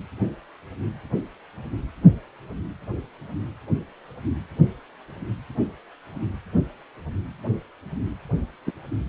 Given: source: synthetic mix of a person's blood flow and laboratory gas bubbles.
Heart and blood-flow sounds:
Doppler ultrasound of blood flow; precordium
8.66-8.71 s: bubbles
From the record:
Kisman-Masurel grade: 112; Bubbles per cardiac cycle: 1 to 2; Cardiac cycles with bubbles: 1 to 10%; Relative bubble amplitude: moderate (0.250 to 0.450); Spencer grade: 1 (occasional bubble signal discernible with the cardiac motion signal, with majority of cardiac periods free of bubbles); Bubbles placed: anywhere in the cardiac cycle

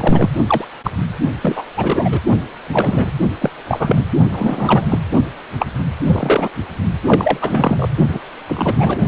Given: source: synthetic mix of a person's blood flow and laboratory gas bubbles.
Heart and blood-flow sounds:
Doppler ultrasound of blood flow; precordium
0.00-0.29 s: bubbles
0.47-0.65 s: bubbles
0.83-0.91 s: bubbles
1.41-1.65 s: bubbles
1.77-2.20 s: bubbles
2.71-3.11 s: bubbles
3.38-3.50 s: bubbles
3.67-4.04 s: bubbles
4.32-4.86 s: bubbles
4.88-4.98 s: bubbles
5.58-5.67 s: bubbles
6.05-6.48 s: bubbles
7.06-7.38 s: bubbles
7.41-7.89 s: bubbles
8.09-8.19 s: bubbles
8.48-8.99 s: bubbles
From the record:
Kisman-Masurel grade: 243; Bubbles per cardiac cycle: several, 3 to 8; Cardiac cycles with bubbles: 100%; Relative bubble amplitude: loud (0.450 to 0.775); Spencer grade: 3 (all of the cardiac periods contain showers or single bubble signals, but not dominating or overriding the cardiac motion signals); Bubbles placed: only in the low amplitude regions of the cardiac cycle

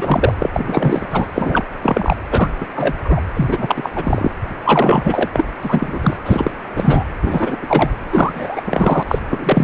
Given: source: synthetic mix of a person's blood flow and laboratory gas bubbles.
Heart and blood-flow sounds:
Doppler ultrasound of blood flow; precordium
0.00-0.34 s: bubbles
0.40-0.49 s: bubbles
0.53-1.06 s: bubbles
1.10-1.26 s: bubbles
1.32-1.64 s: bubbles
1.82-2.17 s: bubbles
2.30-2.49 s: bubbles
2.60-2.65 s: bubbles
2.76-2.94 s: bubbles
3.04-3.21 s: bubbles
3.34-3.89 s: bubbles
3.95-4.30 s: bubbles
4.65-5.29 s: bubbles
5.34-5.46 s: bubbles
5.62-6.17 s: bubbles
6.25-6.51 s: bubbles
6.75-7.04 s: bubbles
7.21-7.58 s: bubbles
7.62-7.90 s: bubbles
8.07-9.03 s: bubbles
9.07-9.19 s: bubbles
9.30-9.64 s: bubbles
From the record:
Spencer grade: 3 (all of the cardiac periods contain showers or single bubble signals, but not dominating or overriding the cardiac motion signals); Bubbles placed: anywhere in the cardiac cycle

